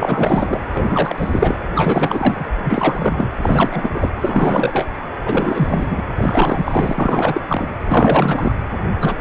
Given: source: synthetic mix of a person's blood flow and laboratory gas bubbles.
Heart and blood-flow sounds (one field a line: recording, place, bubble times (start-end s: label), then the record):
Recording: Doppler ultrasound of blood flow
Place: precordium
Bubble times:
0.00-0.61 s: bubbles
0.73-1.57 s: bubbles
1.75-2.47 s: bubbles
2.64-3.29 s: bubbles
3.42-4.11 s: bubbles
4.20-4.88 s: bubbles
5.25-6.03 s: bubbles
6.18-7.75 s: bubbles
7.86-8.54 s: bubbles
9.00-9.14 s: bubbles
From the record:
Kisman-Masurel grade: 444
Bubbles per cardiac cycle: continuous sound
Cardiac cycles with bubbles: 100%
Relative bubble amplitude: maximal (0.775 to 0.999)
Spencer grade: 4 (maximum detectable bubble signal sounding continuously throughout systole and diastole of every cardiac period, and overriding the amplitude of the normal cardiac signals)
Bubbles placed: anywhere in the cardiac cycle